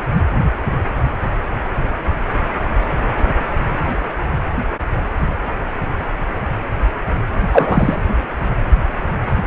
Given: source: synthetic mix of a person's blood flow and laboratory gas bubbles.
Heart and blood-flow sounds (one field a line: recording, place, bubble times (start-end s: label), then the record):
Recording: Doppler ultrasound of blood flow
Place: precordium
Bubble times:
7.52-8.03 s: bubbles
From the record:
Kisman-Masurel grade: 213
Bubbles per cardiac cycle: several, 3 to 8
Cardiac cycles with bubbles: 1 to 10%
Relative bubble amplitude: loud (0.450 to 0.775)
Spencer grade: 1 (occasional bubble signal discernible with the cardiac motion signal, with majority of cardiac periods free of bubbles)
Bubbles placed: anywhere in the cardiac cycle